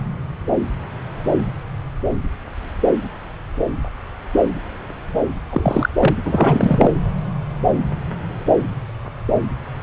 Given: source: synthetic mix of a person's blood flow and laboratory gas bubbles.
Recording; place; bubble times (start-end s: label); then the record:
Doppler ultrasound of blood flow; subclavian vein
5.50-5.89 s: bubbles
5.99-6.15 s: bubbles
6.25-6.94 s: bubbles
From the record:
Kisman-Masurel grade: 223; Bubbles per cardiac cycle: several, 3 to 8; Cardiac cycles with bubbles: 10 to 50%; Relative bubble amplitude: loud (0.450 to 0.775); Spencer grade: 2 (many but less than half of the cardiac periods contain bubble signals, singularly or in groups); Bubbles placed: anywhere in the cardiac cycle